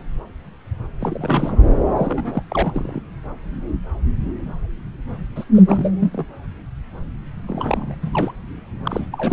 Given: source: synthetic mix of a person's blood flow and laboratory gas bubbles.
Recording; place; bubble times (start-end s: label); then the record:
Doppler ultrasound of blood flow; subclavian vein
1.00-1.62 s: bubbles
1.97-2.43 s: bubbles
2.50-3.00 s: bubbles
5.35-5.44 s: bubbles
5.54-5.62 s: bubbles
5.67-5.91 s: bubbles
6.00-6.27 s: bubbles
7.48-7.95 s: bubbles
8.02-8.09 s: bubbles
8.12-8.32 s: bubbles
8.85-9.06 s: bubbles
9.12-9.33 s: bubbles
From the record:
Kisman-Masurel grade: 332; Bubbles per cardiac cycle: rolling drumbeat, 9 or more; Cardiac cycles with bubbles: 50 to 99%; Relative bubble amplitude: moderate (0.250 to 0.450); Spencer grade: 3 (all of the cardiac periods contain showers or single bubble signals, but not dominating or overriding the cardiac motion signals); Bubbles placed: anywhere in the cardiac cycle